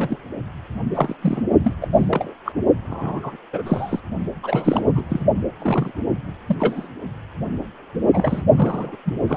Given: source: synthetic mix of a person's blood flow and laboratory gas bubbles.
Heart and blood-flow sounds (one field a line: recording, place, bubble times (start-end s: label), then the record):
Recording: Doppler ultrasound of blood flow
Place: precordium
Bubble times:
0.00-0.17 s: bubbles
0.95-1.15 s: bubbles
1.23-1.42 s: bubbles
1.64-1.73 s: bubbles
1.81-1.87 s: bubbles
1.94-2.33 s: bubbles
2.44-2.52 s: bubbles
2.88-3.37 s: bubbles
3.52-3.62 s: bubbles
3.65-4.00 s: bubbles
4.43-4.82 s: bubbles
4.86-5.04 s: bubbles
5.09-5.25 s: bubbles
5.60-5.92 s: bubbles
6.48-6.55 s: bubbles
6.59-6.88 s: bubbles
8.13-8.42 s: bubbles
8.55-8.96 s: bubbles
9.05-9.14 s: bubbles
9.28-9.37 s: bubbles
From the record:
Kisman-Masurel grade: 242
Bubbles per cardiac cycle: several, 3 to 8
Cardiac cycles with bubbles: 100%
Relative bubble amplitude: moderate (0.250 to 0.450)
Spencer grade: 3 (all of the cardiac periods contain showers or single bubble signals, but not dominating or overriding the cardiac motion signals)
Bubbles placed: only in the low amplitude regions of the cardiac cycle